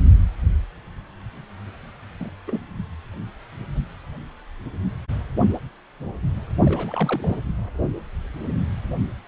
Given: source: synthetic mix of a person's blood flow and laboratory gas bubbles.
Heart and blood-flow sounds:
Doppler ultrasound of blood flow; precordium
2.19-2.31 s: bubbles
2.48-2.60 s: bubbles
6.65-7.38 s: bubbles
From the record:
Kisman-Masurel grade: 221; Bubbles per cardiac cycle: several, 3 to 8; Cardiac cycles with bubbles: 10 to 50%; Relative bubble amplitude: barely perceptible (0.100 to 0.250); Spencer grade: 2 (many but less than half of the cardiac periods contain bubble signals, singularly or in groups); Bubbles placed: anywhere in the cardiac cycle

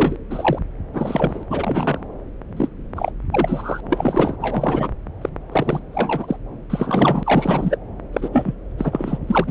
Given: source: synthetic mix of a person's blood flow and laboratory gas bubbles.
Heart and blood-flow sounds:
Doppler ultrasound of blood flow; subclavian vein
0.00-0.16 s: bubbles
0.30-0.59 s: bubbles
0.93-1.43 s: bubbles
1.49-1.99 s: bubbles
2.56-2.69 s: bubbles
2.96-3.11 s: bubbles
3.31-3.80 s: bubbles
3.90-4.37 s: bubbles
4.40-4.88 s: bubbles
5.21-5.29 s: bubbles
5.52-5.80 s: bubbles
5.92-6.37 s: bubbles
6.70-7.77 s: bubbles
8.13-8.29 s: bubbles
8.32-8.54 s: bubbles
8.78-9.18 s: bubbles
9.27-9.51 s: bubbles
From the record:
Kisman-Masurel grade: 242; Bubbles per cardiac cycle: several, 3 to 8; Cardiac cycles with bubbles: 100%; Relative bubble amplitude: moderate (0.250 to 0.450); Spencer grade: 3 (all of the cardiac periods contain showers or single bubble signals, but not dominating or overriding the cardiac motion signals); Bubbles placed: anywhere in the cardiac cycle

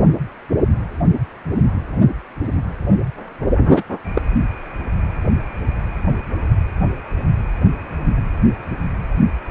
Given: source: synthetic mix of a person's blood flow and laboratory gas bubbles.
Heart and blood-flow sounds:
Doppler ultrasound of blood flow; precordium
3.74-3.83 s: bubbles
4.15-4.21 s: bubbles
From the record:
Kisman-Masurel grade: 113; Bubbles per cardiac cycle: 1 to 2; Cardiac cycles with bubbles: 1 to 10%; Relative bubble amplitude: loud (0.450 to 0.775); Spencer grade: 1 (occasional bubble signal discernible with the cardiac motion signal, with majority of cardiac periods free of bubbles); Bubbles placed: anywhere in the cardiac cycle

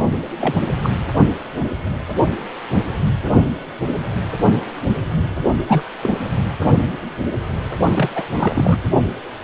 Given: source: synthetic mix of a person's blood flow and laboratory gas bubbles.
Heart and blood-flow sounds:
Doppler ultrasound of blood flow; precordium
0.41-0.56 s: bubbles
0.82-0.91 s: bubbles
5.67-5.83 s: bubbles
6.01-6.14 s: bubbles
7.93-8.09 s: bubbles
8.15-8.23 s: bubbles
8.38-8.78 s: bubbles
From the record:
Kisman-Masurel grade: 232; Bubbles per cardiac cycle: several, 3 to 8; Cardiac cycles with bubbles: 50 to 99%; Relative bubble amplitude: moderate (0.250 to 0.450); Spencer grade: 3 (all of the cardiac periods contain showers or single bubble signals, but not dominating or overriding the cardiac motion signals); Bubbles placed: only in the low amplitude regions of the cardiac cycle

